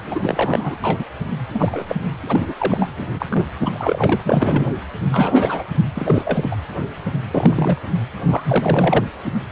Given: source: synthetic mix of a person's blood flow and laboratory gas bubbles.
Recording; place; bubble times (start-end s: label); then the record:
Doppler ultrasound of blood flow; precordium
0.00-0.79 s: bubbles
0.83-1.04 s: bubbles
1.53-1.96 s: bubbles
2.27-2.54 s: bubbles
2.56-2.89 s: bubbles
2.97-3.06 s: bubbles
3.18-3.26 s: bubbles
3.29-3.46 s: bubbles
3.60-4.21 s: bubbles
4.26-4.75 s: bubbles
5.12-5.64 s: bubbles
5.95-6.55 s: bubbles
7.32-7.78 s: bubbles
8.28-9.08 s: bubbles
From the record:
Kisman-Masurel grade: 232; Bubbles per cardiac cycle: several, 3 to 8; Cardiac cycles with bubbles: 50 to 99%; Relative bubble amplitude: moderate (0.250 to 0.450); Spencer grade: 3 (all of the cardiac periods contain showers or single bubble signals, but not dominating or overriding the cardiac motion signals); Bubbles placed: anywhere in the cardiac cycle